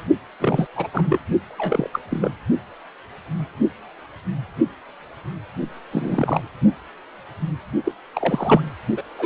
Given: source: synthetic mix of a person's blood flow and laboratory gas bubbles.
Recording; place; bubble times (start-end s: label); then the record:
Doppler ultrasound of blood flow; precordium
0.40-0.67 s: bubbles
0.76-0.88 s: bubbles
0.94-1.19 s: bubbles
1.48-1.90 s: bubbles
1.93-1.99 s: bubbles
2.10-2.30 s: bubbles
5.91-6.42 s: bubbles
7.84-7.92 s: bubbles
8.13-8.61 s: bubbles
8.96-9.02 s: bubbles
9.18-9.26 s: bubbles
From the record:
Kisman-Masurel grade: 222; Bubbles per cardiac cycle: several, 3 to 8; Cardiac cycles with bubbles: 10 to 50%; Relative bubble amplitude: moderate (0.250 to 0.450); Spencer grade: 2 (many but less than half of the cardiac periods contain bubble signals, singularly or in groups); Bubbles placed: only in the low amplitude regions of the cardiac cycle